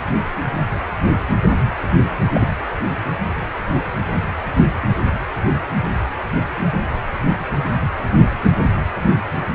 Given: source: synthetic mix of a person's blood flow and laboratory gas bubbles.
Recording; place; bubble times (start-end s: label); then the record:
Doppler ultrasound of blood flow; precordium
2.34-2.48 s: bubbles
From the record:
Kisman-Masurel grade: 112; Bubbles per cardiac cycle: 1 to 2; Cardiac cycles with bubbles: 1 to 10%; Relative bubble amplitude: moderate (0.250 to 0.450); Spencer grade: 1 (occasional bubble signal discernible with the cardiac motion signal, with majority of cardiac periods free of bubbles); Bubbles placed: anywhere in the cardiac cycle